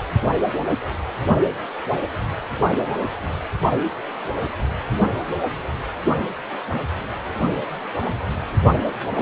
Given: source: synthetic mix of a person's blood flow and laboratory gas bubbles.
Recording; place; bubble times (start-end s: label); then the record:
Doppler ultrasound of blood flow; precordium
9.17-9.22 s: bubbles
From the record:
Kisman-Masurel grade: 111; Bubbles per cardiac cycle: 1 to 2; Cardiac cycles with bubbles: 1 to 10%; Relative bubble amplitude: barely perceptible (0.100 to 0.250); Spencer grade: 1 (occasional bubble signal discernible with the cardiac motion signal, with majority of cardiac periods free of bubbles); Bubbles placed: only in the low amplitude regions of the cardiac cycle